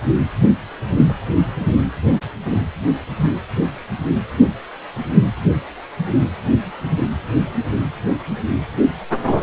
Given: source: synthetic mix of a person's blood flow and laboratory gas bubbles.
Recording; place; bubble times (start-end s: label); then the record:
Doppler ultrasound of blood flow; precordium
1.08-1.12 s: bubbles
From the record:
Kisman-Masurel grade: 112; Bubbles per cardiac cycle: 1 to 2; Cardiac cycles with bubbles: 1 to 10%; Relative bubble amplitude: moderate (0.250 to 0.450); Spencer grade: 1 (occasional bubble signal discernible with the cardiac motion signal, with majority of cardiac periods free of bubbles); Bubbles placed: only in the low amplitude regions of the cardiac cycle